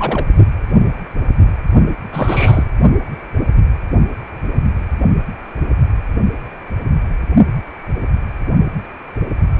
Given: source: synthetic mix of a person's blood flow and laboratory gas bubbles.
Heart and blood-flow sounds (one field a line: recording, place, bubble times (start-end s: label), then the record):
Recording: Doppler ultrasound of blood flow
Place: precordium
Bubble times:
0.00-0.27 s: bubbles
2.12-2.64 s: bubbles
From the record:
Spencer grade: 2 (many but less than half of the cardiac periods contain bubble signals, singularly or in groups)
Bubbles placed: only in the low amplitude regions of the cardiac cycle